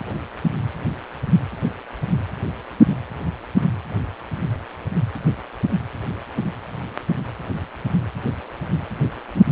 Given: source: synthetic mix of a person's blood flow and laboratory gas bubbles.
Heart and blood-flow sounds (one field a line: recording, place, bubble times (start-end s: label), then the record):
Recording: Doppler ultrasound of blood flow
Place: precordium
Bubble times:
9.34-9.44 s: bubbles
From the record:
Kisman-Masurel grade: 111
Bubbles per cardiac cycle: 1 to 2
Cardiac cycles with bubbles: 1 to 10%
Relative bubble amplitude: barely perceptible (0.100 to 0.250)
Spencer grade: 1 (occasional bubble signal discernible with the cardiac motion signal, with majority of cardiac periods free of bubbles)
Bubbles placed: anywhere in the cardiac cycle